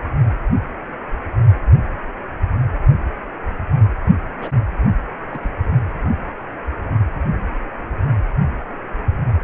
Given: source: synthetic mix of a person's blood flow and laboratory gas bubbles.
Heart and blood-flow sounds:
Doppler ultrasound of blood flow; precordium
4.38-4.50 s: bubbles
5.30-5.51 s: bubbles
From the record:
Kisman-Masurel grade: 211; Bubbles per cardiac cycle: several, 3 to 8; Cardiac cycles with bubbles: 1 to 10%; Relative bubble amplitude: barely perceptible (0.100 to 0.250); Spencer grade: 1 (occasional bubble signal discernible with the cardiac motion signal, with majority of cardiac periods free of bubbles); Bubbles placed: only in the low amplitude regions of the cardiac cycle

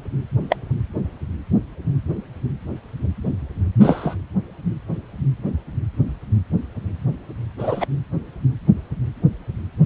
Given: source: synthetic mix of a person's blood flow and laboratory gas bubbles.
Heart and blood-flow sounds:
Doppler ultrasound of blood flow; precordium
0.49-0.56 s: bubbles
3.80-4.16 s: bubbles
7.58-7.86 s: bubbles
From the record:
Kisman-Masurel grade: 123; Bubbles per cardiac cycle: 1 to 2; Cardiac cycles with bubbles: 10 to 50%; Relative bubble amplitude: loud (0.450 to 0.775); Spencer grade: 2 (many but less than half of the cardiac periods contain bubble signals, singularly or in groups); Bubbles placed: anywhere in the cardiac cycle

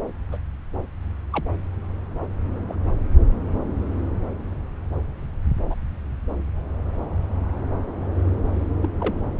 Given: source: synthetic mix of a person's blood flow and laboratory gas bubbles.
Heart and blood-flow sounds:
Doppler ultrasound of blood flow; subclavian vein
0.32-0.38 s: bubbles
1.32-1.44 s: bubbles
2.69-2.76 s: bubbles
5.68-5.75 s: bubbles
8.81-8.88 s: bubbles
9.00-9.14 s: bubbles
From the record:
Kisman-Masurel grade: 121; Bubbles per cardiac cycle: 1 to 2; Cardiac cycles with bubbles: 10 to 50%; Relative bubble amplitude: barely perceptible (0.100 to 0.250); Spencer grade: 2 (many but less than half of the cardiac periods contain bubble signals, singularly or in groups); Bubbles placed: anywhere in the cardiac cycle

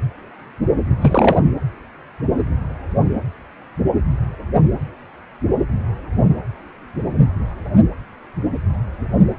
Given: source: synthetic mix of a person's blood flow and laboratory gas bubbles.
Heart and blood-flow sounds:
Doppler ultrasound of blood flow; precordium
1.00-1.39 s: bubbles
From the record:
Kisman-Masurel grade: 213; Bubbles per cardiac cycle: several, 3 to 8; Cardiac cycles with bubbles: 1 to 10%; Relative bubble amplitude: loud (0.450 to 0.775); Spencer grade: 1 (occasional bubble signal discernible with the cardiac motion signal, with majority of cardiac periods free of bubbles); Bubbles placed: anywhere in the cardiac cycle

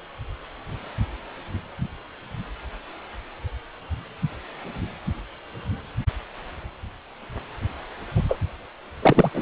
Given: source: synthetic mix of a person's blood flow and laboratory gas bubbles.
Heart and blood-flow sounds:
Doppler ultrasound of blood flow; precordium
8.14-8.23 s: bubbles
8.29-8.38 s: bubbles
9.02-9.29 s: bubbles
9.34-9.42 s: bubbles
From the record:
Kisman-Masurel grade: 212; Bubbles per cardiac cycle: several, 3 to 8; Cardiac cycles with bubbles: 1 to 10%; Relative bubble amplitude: moderate (0.250 to 0.450); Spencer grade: 1 (occasional bubble signal discernible with the cardiac motion signal, with majority of cardiac periods free of bubbles); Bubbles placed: anywhere in the cardiac cycle

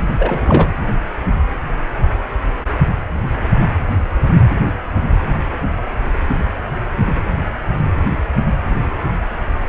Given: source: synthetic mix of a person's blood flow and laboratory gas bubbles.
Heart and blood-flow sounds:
Doppler ultrasound of blood flow; precordium
0.19-0.68 s: bubbles
From the record:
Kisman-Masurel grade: 223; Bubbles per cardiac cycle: several, 3 to 8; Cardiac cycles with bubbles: 10 to 50%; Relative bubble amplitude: loud (0.450 to 0.775); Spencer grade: 2 (many but less than half of the cardiac periods contain bubble signals, singularly or in groups); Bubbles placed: anywhere in the cardiac cycle

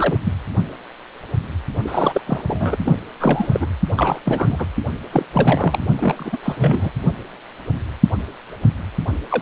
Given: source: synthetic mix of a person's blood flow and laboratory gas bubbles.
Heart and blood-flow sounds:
Doppler ultrasound of blood flow; precordium
0.00-0.19 s: bubbles
0.24-0.33 s: bubbles
1.84-2.21 s: bubbles
2.27-2.42 s: bubbles
2.47-2.77 s: bubbles
2.85-2.96 s: bubbles
3.19-3.67 s: bubbles
3.96-4.19 s: bubbles
4.25-4.67 s: bubbles
5.12-5.25 s: bubbles
5.33-5.81 s: bubbles
5.96-6.38 s: bubbles
6.43-6.91 s: bubbles
9.30-9.42 s: bubbles
From the record:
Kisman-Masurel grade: 332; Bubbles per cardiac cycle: rolling drumbeat, 9 or more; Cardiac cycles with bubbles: 50 to 99%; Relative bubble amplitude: moderate (0.250 to 0.450); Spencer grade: 3 (all of the cardiac periods contain showers or single bubble signals, but not dominating or overriding the cardiac motion signals); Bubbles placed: only in the low amplitude regions of the cardiac cycle

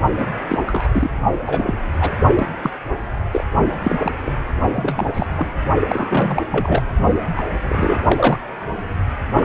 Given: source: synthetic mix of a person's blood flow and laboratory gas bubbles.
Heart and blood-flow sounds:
Doppler ultrasound of blood flow; precordium
0.18-0.27 s: bubbles
0.48-0.58 s: bubbles
0.66-0.88 s: bubbles
0.92-1.10 s: bubbles
1.46-1.74 s: bubbles
2.00-2.13 s: bubbles
2.36-2.47 s: bubbles
2.62-2.71 s: bubbles
3.32-3.44 s: bubbles
3.83-4.12 s: bubbles
4.25-4.33 s: bubbles
4.75-5.09 s: bubbles
5.13-5.28 s: bubbles
5.37-5.48 s: bubbles
5.88-6.42 s: bubbles
6.50-6.85 s: bubbles
7.36-7.44 s: bubbles
7.62-8.03 s: bubbles
8.07-8.39 s: bubbles
9.33-9.44 s: bubbles
From the record:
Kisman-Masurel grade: 242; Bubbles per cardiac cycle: several, 3 to 8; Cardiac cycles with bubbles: 100%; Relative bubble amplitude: moderate (0.250 to 0.450); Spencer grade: 3 (all of the cardiac periods contain showers or single bubble signals, but not dominating or overriding the cardiac motion signals); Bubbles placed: only in the low amplitude regions of the cardiac cycle

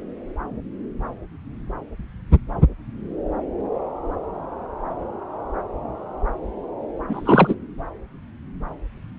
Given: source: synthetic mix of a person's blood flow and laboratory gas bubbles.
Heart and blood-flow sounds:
Doppler ultrasound of blood flow; subclavian vein
7.08-7.55 s: bubbles
From the record:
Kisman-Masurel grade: 223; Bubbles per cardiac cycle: several, 3 to 8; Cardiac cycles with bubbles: 10 to 50%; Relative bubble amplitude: loud (0.450 to 0.775); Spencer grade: 2 (many but less than half of the cardiac periods contain bubble signals, singularly or in groups); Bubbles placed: anywhere in the cardiac cycle

